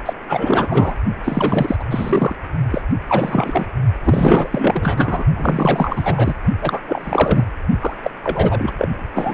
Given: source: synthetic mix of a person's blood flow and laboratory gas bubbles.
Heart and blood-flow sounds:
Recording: Doppler ultrasound of blood flow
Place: precordium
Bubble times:
0.05-0.14 s: bubbles
0.28-0.95 s: bubbles
1.24-1.76 s: bubbles
1.79-1.84 s: bubbles
1.91-2.36 s: bubbles
2.71-2.82 s: bubbles
3.08-3.67 s: bubbles
4.03-5.24 s: bubbles
5.36-6.35 s: bubbles
6.61-6.80 s: bubbles
6.88-7.48 s: bubbles
7.81-7.94 s: bubbles
8.02-8.10 s: bubbles
8.23-8.73 s: bubbles
8.78-8.88 s: bubbles
9.14-9.34 s: bubbles
From the record:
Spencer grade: 4 (maximum detectable bubble signal sounding continuously throughout systole and diastole of every cardiac period, and overriding the amplitude of the normal cardiac signals)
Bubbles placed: only in the low amplitude regions of the cardiac cycle

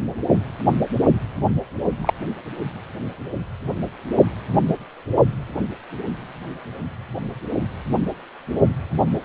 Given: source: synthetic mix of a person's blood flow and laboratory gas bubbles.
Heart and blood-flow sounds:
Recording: Doppler ultrasound of blood flow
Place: precordium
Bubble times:
2.02-2.13 s: bubbles
From the record:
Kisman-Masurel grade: 113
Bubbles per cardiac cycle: 1 to 2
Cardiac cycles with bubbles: 1 to 10%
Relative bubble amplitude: loud (0.450 to 0.775)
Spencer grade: 1 (occasional bubble signal discernible with the cardiac motion signal, with majority of cardiac periods free of bubbles)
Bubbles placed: only in the low amplitude regions of the cardiac cycle

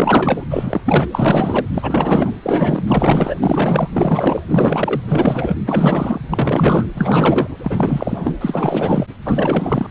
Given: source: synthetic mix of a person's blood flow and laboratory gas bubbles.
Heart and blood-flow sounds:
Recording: Doppler ultrasound of blood flow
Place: precordium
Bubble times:
0.00-0.46 s: bubbles
0.50-0.81 s: bubbles
0.85-1.07 s: bubbles
1.11-1.65 s: bubbles
1.73-2.31 s: bubbles
2.42-2.84 s: bubbles
2.87-3.35 s: bubbles
3.41-3.90 s: bubbles
3.92-4.41 s: bubbles
4.49-5.00 s: bubbles
5.06-5.55 s: bubbles
5.66-6.21 s: bubbles
6.30-6.87 s: bubbles
6.95-7.47 s: bubbles
7.63-8.38 s: bubbles
8.40-9.06 s: bubbles
9.24-9.87 s: bubbles
From the record:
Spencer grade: 4 (maximum detectable bubble signal sounding continuously throughout systole and diastole of every cardiac period, and overriding the amplitude of the normal cardiac signals)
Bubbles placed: anywhere in the cardiac cycle

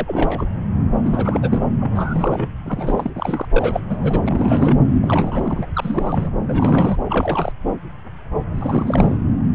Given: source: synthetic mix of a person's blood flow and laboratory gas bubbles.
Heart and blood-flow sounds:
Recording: Doppler ultrasound of blood flow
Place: subclavian vein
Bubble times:
0.00-0.45 s: bubbles
1.03-1.62 s: bubbles
1.80-2.48 s: bubbles
2.66-3.10 s: bubbles
3.15-3.46 s: bubbles
3.51-3.85 s: bubbles
3.89-4.21 s: bubbles
4.26-4.75 s: bubbles
5.01-5.67 s: bubbles
5.75-6.31 s: bubbles
6.47-6.96 s: bubbles
7.05-7.52 s: bubbles
8.54-9.18 s: bubbles
From the record:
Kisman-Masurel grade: 332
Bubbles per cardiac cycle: rolling drumbeat, 9 or more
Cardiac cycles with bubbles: 50 to 99%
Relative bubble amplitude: moderate (0.250 to 0.450)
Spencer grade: 3 (all of the cardiac periods contain showers or single bubble signals, but not dominating or overriding the cardiac motion signals)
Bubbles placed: anywhere in the cardiac cycle

